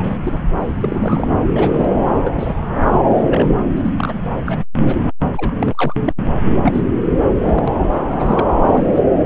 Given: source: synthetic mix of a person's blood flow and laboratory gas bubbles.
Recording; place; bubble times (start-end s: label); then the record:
Doppler ultrasound of blood flow; subclavian vein
0.00-0.40 s: bubbles
0.59-1.27 s: bubbles
1.55-1.85 s: bubbles
2.17-2.19 s: bubbles
2.23-2.55 s: bubbles
2.92-3.01 s: bubbles
3.26-3.50 s: bubbles
3.76-3.93 s: bubbles
3.96-4.13 s: bubbles
4.46-4.64 s: bubbles
4.80-4.96 s: bubbles
5.33-5.96 s: bubbles
6.04-6.13 s: bubbles
6.62-6.81 s: bubbles
7.36-7.64 s: bubbles
7.67-7.73 s: bubbles
7.89-8.02 s: bubbles
8.08-8.46 s: bubbles
8.64-9.02 s: bubbles
From the record:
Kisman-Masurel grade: 242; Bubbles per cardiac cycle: several, 3 to 8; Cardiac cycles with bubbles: 100%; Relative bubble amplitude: moderate (0.250 to 0.450); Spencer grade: 3 (all of the cardiac periods contain showers or single bubble signals, but not dominating or overriding the cardiac motion signals); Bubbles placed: anywhere in the cardiac cycle